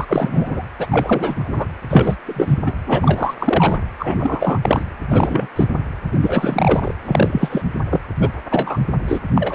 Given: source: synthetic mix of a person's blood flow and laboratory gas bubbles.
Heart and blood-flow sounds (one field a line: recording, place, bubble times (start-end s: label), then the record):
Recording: Doppler ultrasound of blood flow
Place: precordium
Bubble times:
0.00-0.05 s: bubbles
0.07-0.64 s: bubbles
0.79-1.66 s: bubbles
1.89-2.17 s: bubbles
2.26-2.60 s: bubbles
2.66-2.73 s: bubbles
2.87-3.34 s: bubbles
3.40-3.78 s: bubbles
4.00-4.59 s: bubbles
4.62-4.85 s: bubbles
5.10-5.47 s: bubbles
5.55-5.67 s: bubbles
6.12-6.18 s: bubbles
6.21-6.94 s: bubbles
7.04-7.62 s: bubbles
7.90-8.00 s: bubbles
8.20-8.30 s: bubbles
8.51-8.79 s: bubbles
9.06-9.20 s: bubbles
9.35-9.54 s: bubbles
From the record:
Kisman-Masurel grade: 343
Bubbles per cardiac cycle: rolling drumbeat, 9 or more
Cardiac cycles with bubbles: 100%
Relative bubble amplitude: loud (0.450 to 0.775)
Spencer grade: 3 (all of the cardiac periods contain showers or single bubble signals, but not dominating or overriding the cardiac motion signals)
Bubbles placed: anywhere in the cardiac cycle